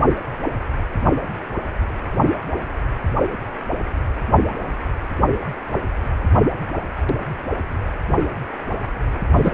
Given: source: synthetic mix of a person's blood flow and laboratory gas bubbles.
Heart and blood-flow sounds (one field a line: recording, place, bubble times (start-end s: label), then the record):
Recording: Doppler ultrasound of blood flow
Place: precordium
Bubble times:
9.36-9.52 s: bubbles
From the record:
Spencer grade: 2 (many but less than half of the cardiac periods contain bubble signals, singularly or in groups)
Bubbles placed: anywhere in the cardiac cycle